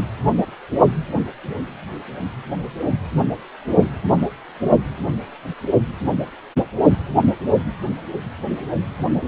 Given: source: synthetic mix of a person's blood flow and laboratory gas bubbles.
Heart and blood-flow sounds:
Doppler ultrasound of blood flow; precordium
no bubbles
From the record:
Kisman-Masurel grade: 000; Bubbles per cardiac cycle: 0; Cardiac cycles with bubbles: 0%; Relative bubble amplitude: no bubbles discernible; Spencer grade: 0 (complete lack of bubble signals)

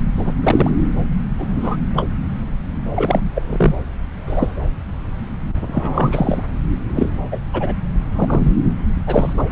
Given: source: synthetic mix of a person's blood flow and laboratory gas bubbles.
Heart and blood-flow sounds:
Doppler ultrasound of blood flow; subclavian vein
0.18-0.32 s: bubbles
0.43-0.70 s: bubbles
1.38-1.77 s: bubbles
1.96-2.03 s: bubbles
2.95-3.22 s: bubbles
3.34-3.42 s: bubbles
3.47-3.75 s: bubbles
4.27-4.58 s: bubbles
5.52-6.44 s: bubbles
6.95-7.11 s: bubbles
7.31-7.40 s: bubbles
7.53-7.74 s: bubbles
8.16-8.54 s: bubbles
9.06-9.33 s: bubbles
9.37-9.44 s: bubbles
9.49-9.52 s: bubbles
From the record:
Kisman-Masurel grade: 243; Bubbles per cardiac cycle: several, 3 to 8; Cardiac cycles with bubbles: 100%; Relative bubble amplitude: loud (0.450 to 0.775); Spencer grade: 3 (all of the cardiac periods contain showers or single bubble signals, but not dominating or overriding the cardiac motion signals); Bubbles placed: anywhere in the cardiac cycle

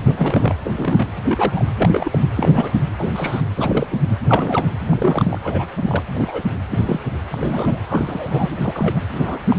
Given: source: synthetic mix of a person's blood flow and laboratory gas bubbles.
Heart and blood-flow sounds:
Doppler ultrasound of blood flow; precordium
0.08-0.55 s: bubbles
0.63-1.08 s: bubbles
1.26-1.65 s: bubbles
1.78-2.19 s: bubbles
2.36-2.74 s: bubbles
2.99-3.11 s: bubbles
3.14-3.42 s: bubbles
3.57-3.87 s: bubbles
3.90-3.98 s: bubbles
4.25-4.68 s: bubbles
4.89-5.38 s: bubbles
5.44-5.67 s: bubbles
5.76-5.83 s: bubbles
5.87-6.01 s: bubbles
6.13-6.42 s: bubbles
6.70-7.00 s: bubbles
7.31-7.79 s: bubbles
7.88-8.50 s: bubbles
8.61-8.99 s: bubbles
9.12-9.40 s: bubbles
9.49-9.56 s: bubbles
From the record:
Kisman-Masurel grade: 242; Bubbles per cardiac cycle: several, 3 to 8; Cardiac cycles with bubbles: 100%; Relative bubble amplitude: moderate (0.250 to 0.450); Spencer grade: 3 (all of the cardiac periods contain showers or single bubble signals, but not dominating or overriding the cardiac motion signals); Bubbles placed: anywhere in the cardiac cycle

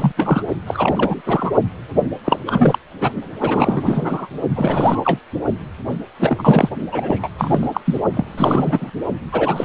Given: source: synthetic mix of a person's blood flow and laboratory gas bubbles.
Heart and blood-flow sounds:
Doppler ultrasound of blood flow; precordium
0.00-0.12 s: bubbles
0.16-0.43 s: bubbles
0.66-1.21 s: bubbles
1.25-1.52 s: bubbles
2.24-2.39 s: bubbles
2.47-2.79 s: bubbles
3.01-3.10 s: bubbles
3.39-4.28 s: bubbles
4.56-5.01 s: bubbles
5.04-5.19 s: bubbles
5.88-5.95 s: bubbles
6.20-6.70 s: bubbles
6.92-7.29 s: bubbles
7.38-7.67 s: bubbles
7.74-7.81 s: bubbles
7.85-8.00 s: bubbles
8.13-8.90 s: bubbles
9.32-9.65 s: bubbles
From the record:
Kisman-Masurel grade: 343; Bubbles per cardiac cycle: rolling drumbeat, 9 or more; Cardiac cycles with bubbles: 100%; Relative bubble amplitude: loud (0.450 to 0.775); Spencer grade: 3 (all of the cardiac periods contain showers or single bubble signals, but not dominating or overriding the cardiac motion signals); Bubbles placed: only in the low amplitude regions of the cardiac cycle

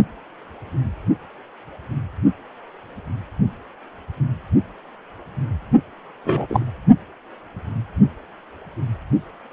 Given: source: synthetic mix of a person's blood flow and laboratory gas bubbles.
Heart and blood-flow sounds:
Doppler ultrasound of blood flow; precordium
6.25-6.65 s: bubbles
From the record:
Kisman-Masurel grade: 113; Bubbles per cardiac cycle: 1 to 2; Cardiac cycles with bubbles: 1 to 10%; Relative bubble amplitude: loud (0.450 to 0.775); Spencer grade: 1 (occasional bubble signal discernible with the cardiac motion signal, with majority of cardiac periods free of bubbles); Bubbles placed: only in the low amplitude regions of the cardiac cycle

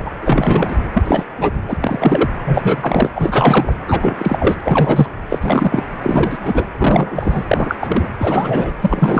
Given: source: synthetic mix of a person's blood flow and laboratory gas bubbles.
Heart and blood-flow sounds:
Doppler ultrasound of blood flow; precordium
0.00-0.10 s: bubbles
0.22-0.77 s: bubbles
0.96-1.25 s: bubbles
1.38-1.51 s: bubbles
1.68-1.77 s: bubbles
1.80-2.30 s: bubbles
2.45-3.10 s: bubbles
3.15-3.73 s: bubbles
3.88-4.54 s: bubbles
4.64-5.12 s: bubbles
5.29-5.85 s: bubbles
6.02-6.65 s: bubbles
6.78-7.45 s: bubbles
7.48-7.75 s: bubbles
7.80-8.06 s: bubbles
8.18-8.73 s: bubbles
8.80-9.20 s: bubbles
From the record:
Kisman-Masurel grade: 343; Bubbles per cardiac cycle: rolling drumbeat, 9 or more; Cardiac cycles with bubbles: 100%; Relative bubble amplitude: loud (0.450 to 0.775); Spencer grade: 3 (all of the cardiac periods contain showers or single bubble signals, but not dominating or overriding the cardiac motion signals); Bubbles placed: anywhere in the cardiac cycle

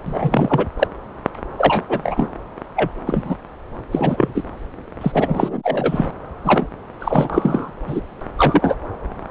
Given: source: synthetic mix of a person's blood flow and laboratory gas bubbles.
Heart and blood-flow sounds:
Doppler ultrasound of blood flow; subclavian vein
0.06-0.67 s: bubbles
0.79-0.87 s: bubbles
1.57-1.85 s: bubbles
1.89-2.28 s: bubbles
2.76-2.91 s: bubbles
3.06-3.36 s: bubbles
3.92-4.43 s: bubbles
5.01-6.07 s: bubbles
6.45-6.67 s: bubbles
7.00-7.71 s: bubbles
7.86-8.01 s: bubbles
8.38-8.75 s: bubbles
From the record:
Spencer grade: 3 (all of the cardiac periods contain showers or single bubble signals, but not dominating or overriding the cardiac motion signals); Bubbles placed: anywhere in the cardiac cycle

